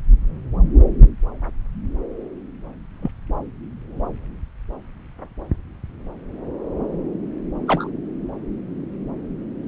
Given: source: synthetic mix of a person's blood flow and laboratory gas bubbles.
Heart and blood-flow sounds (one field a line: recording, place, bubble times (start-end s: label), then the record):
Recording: Doppler ultrasound of blood flow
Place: subclavian vein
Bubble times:
3.02-3.10 s: bubbles
7.67-7.91 s: bubbles
From the record:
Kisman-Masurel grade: 122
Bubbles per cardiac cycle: 1 to 2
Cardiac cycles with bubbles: 10 to 50%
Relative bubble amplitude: moderate (0.250 to 0.450)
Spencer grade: 2 (many but less than half of the cardiac periods contain bubble signals, singularly or in groups)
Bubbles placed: anywhere in the cardiac cycle